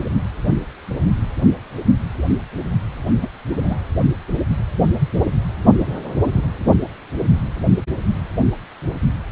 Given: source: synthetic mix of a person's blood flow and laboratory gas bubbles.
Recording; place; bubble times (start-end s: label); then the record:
Doppler ultrasound of blood flow; precordium
3.20-3.29 s: bubbles
3.56-3.81 s: bubbles
From the record:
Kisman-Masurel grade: 212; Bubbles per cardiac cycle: several, 3 to 8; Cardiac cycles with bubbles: 1 to 10%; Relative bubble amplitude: moderate (0.250 to 0.450); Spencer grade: 1 (occasional bubble signal discernible with the cardiac motion signal, with majority of cardiac periods free of bubbles); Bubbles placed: only in the low amplitude regions of the cardiac cycle